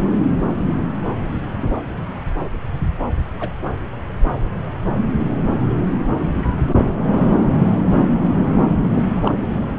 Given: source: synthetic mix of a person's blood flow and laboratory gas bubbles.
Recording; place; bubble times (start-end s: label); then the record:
Doppler ultrasound of blood flow; subclavian vein
3.40-3.53 s: bubbles
9.22-9.34 s: bubbles
From the record:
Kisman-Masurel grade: 112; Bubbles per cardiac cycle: 1 to 2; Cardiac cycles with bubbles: 1 to 10%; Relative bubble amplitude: moderate (0.250 to 0.450); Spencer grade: 1 (occasional bubble signal discernible with the cardiac motion signal, with majority of cardiac periods free of bubbles); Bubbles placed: anywhere in the cardiac cycle